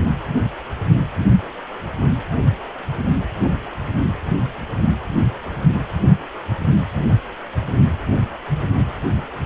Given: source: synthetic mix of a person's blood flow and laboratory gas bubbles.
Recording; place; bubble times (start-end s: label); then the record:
Doppler ultrasound of blood flow; precordium
no bubbles
From the record:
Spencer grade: 0 (complete lack of bubble signals)